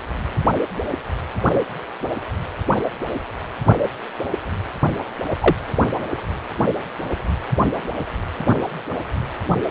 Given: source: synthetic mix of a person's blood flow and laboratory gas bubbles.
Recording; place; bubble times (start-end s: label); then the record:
Doppler ultrasound of blood flow; precordium
5.40-5.55 s: bubbles
From the record:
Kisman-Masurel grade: 113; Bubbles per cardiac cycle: 1 to 2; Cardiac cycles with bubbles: 1 to 10%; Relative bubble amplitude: loud (0.450 to 0.775); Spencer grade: 1 (occasional bubble signal discernible with the cardiac motion signal, with majority of cardiac periods free of bubbles); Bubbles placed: only in the low amplitude regions of the cardiac cycle